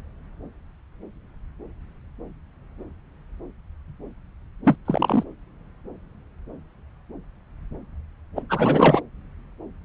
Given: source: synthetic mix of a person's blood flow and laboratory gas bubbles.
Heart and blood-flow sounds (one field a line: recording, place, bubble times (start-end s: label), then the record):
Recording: Doppler ultrasound of blood flow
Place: subclavian vein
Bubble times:
4.64-4.77 s: bubbles
4.85-5.24 s: bubbles
8.36-8.43 s: bubbles
8.49-9.02 s: bubbles
From the record:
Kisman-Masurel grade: 222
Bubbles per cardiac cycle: several, 3 to 8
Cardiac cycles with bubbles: 10 to 50%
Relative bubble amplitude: moderate (0.250 to 0.450)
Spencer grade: 2 (many but less than half of the cardiac periods contain bubble signals, singularly or in groups)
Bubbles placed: anywhere in the cardiac cycle